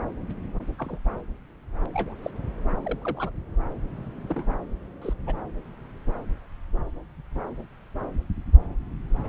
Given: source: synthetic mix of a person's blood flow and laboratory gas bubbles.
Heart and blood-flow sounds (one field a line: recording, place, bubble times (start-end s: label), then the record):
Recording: Doppler ultrasound of blood flow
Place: subclavian vein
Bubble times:
0.78-0.99 s: bubbles
1.93-2.14 s: bubbles
2.22-2.30 s: bubbles
2.84-3.30 s: bubbles
4.29-4.45 s: bubbles
5.01-5.13 s: bubbles
5.26-5.34 s: bubbles
From the record:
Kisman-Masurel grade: 121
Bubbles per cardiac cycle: 1 to 2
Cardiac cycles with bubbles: 10 to 50%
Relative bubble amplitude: barely perceptible (0.100 to 0.250)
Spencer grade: 2 (many but less than half of the cardiac periods contain bubble signals, singularly or in groups)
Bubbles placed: anywhere in the cardiac cycle